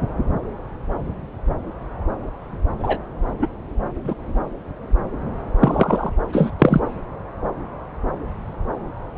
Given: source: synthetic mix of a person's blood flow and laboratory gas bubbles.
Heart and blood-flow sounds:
Doppler ultrasound of blood flow; subclavian vein
2.79-2.99 s: bubbles
3.42-3.47 s: bubbles
4.04-4.14 s: bubbles
5.60-6.11 s: bubbles
6.33-6.50 s: bubbles
6.58-6.81 s: bubbles
From the record:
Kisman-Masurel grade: 123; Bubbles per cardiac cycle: 1 to 2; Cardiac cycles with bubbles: 10 to 50%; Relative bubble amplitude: loud (0.450 to 0.775); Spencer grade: 2 (many but less than half of the cardiac periods contain bubble signals, singularly or in groups); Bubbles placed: anywhere in the cardiac cycle

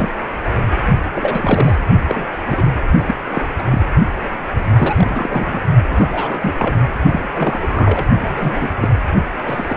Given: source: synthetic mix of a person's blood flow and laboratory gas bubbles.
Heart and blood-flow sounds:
Doppler ultrasound of blood flow; precordium
0.00-0.09 s: bubbles
1.15-1.75 s: bubbles
2.00-2.27 s: bubbles
2.46-2.63 s: bubbles
3.06-3.15 s: bubbles
3.29-3.42 s: bubbles
3.58-3.62 s: bubbles
3.70-3.86 s: bubbles
4.76-5.60 s: bubbles
5.90-6.79 s: bubbles
7.11-8.08 s: bubbles
8.21-8.73 s: bubbles
8.80-8.89 s: bubbles
9.45-9.76 s: bubbles
From the record:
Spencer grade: 3 (all of the cardiac periods contain showers or single bubble signals, but not dominating or overriding the cardiac motion signals); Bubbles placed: only in the low amplitude regions of the cardiac cycle

